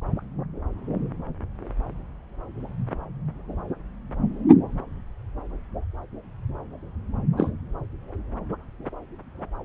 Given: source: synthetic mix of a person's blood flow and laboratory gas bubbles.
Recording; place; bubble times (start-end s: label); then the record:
Doppler ultrasound of blood flow; subclavian vein
7.37-7.49 s: bubbles
From the record:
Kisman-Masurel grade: 112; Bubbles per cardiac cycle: 1 to 2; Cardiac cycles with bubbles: 1 to 10%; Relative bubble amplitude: moderate (0.250 to 0.450); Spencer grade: 1 (occasional bubble signal discernible with the cardiac motion signal, with majority of cardiac periods free of bubbles); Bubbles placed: anywhere in the cardiac cycle